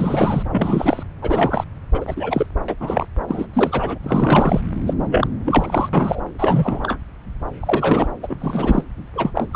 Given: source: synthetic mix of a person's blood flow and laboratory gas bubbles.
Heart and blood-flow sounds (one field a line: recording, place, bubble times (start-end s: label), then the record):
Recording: Doppler ultrasound of blood flow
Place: subclavian vein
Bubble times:
0.00-0.43 s: bubbles
0.51-1.03 s: bubbles
1.22-1.64 s: bubbles
1.94-2.47 s: bubbles
2.68-2.75 s: bubbles
2.80-3.07 s: bubbles
3.28-3.47 s: bubbles
3.53-3.98 s: bubbles
4.02-4.60 s: bubbles
4.86-4.94 s: bubbles
5.10-5.27 s: bubbles
5.45-5.89 s: bubbles
5.93-6.21 s: bubbles
6.38-6.98 s: bubbles
7.60-8.07 s: bubbles
8.23-8.37 s: bubbles
8.40-8.84 s: bubbles
9.15-9.31 s: bubbles
9.34-9.49 s: bubbles
9.51-9.56 s: bubbles
From the record:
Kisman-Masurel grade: 333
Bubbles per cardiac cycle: rolling drumbeat, 9 or more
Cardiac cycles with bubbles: 50 to 99%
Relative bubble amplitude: loud (0.450 to 0.775)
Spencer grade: 3 (all of the cardiac periods contain showers or single bubble signals, but not dominating or overriding the cardiac motion signals)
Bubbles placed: anywhere in the cardiac cycle